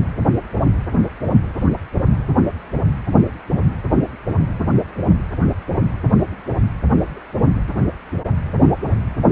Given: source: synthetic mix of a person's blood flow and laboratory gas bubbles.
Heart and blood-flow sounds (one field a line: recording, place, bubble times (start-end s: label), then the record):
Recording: Doppler ultrasound of blood flow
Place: precordium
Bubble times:
no bubbles
From the record:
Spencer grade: 0 (complete lack of bubble signals)